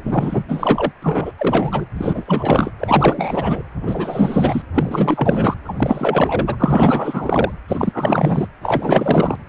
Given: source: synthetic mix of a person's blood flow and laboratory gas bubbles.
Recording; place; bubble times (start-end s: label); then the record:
Doppler ultrasound of blood flow; precordium
0.05-0.44 s: bubbles
0.48-0.92 s: bubbles
1.02-1.32 s: bubbles
1.38-1.86 s: bubbles
1.94-2.71 s: bubbles
2.79-3.63 s: bubbles
3.82-4.62 s: bubbles
4.74-5.54 s: bubbles
5.64-5.74 s: bubbles
5.77-6.56 s: bubbles
6.59-7.52 s: bubbles
7.68-8.46 s: bubbles
8.62-9.37 s: bubbles
From the record:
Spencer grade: 4 (maximum detectable bubble signal sounding continuously throughout systole and diastole of every cardiac period, and overriding the amplitude of the normal cardiac signals); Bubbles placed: anywhere in the cardiac cycle